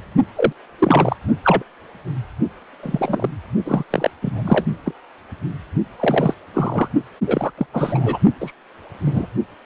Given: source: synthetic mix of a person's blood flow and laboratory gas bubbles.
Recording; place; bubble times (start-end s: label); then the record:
Doppler ultrasound of blood flow; precordium
0.35-0.53 s: bubbles
0.79-1.16 s: bubbles
1.27-1.34 s: bubbles
1.43-1.63 s: bubbles
2.83-3.29 s: bubbles
3.65-3.83 s: bubbles
3.90-4.11 s: bubbles
4.21-4.66 s: bubbles
4.85-4.94 s: bubbles
6.00-6.35 s: bubbles
6.54-6.88 s: bubbles
7.26-7.51 s: bubbles
7.57-7.66 s: bubbles
7.73-8.19 s: bubbles
8.40-8.52 s: bubbles
9.05-9.27 s: bubbles
From the record:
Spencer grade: 3 (all of the cardiac periods contain showers or single bubble signals, but not dominating or overriding the cardiac motion signals); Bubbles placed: only in the low amplitude regions of the cardiac cycle